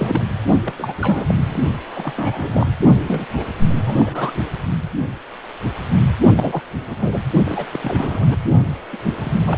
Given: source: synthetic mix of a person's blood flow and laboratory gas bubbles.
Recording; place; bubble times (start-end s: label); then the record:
Doppler ultrasound of blood flow; precordium
0.00-0.21 s: bubbles
0.64-0.74 s: bubbles
0.77-0.94 s: bubbles
0.98-1.54 s: bubbles
1.93-2.73 s: bubbles
3.07-3.25 s: bubbles
3.33-3.46 s: bubbles
3.69-4.32 s: bubbles
6.36-6.62 s: bubbles
6.86-6.96 s: bubbles
7.00-7.21 s: bubbles
7.46-7.65 s: bubbles
7.73-7.79 s: bubbles
7.81-8.36 s: bubbles
8.92-8.97 s: bubbles
9.06-9.15 s: bubbles
9.21-9.30 s: bubbles
9.46-9.58 s: bubbles
From the record:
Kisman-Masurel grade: 232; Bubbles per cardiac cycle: several, 3 to 8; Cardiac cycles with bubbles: 50 to 99%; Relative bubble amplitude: moderate (0.250 to 0.450); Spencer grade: 3 (all of the cardiac periods contain showers or single bubble signals, but not dominating or overriding the cardiac motion signals); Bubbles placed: only in the low amplitude regions of the cardiac cycle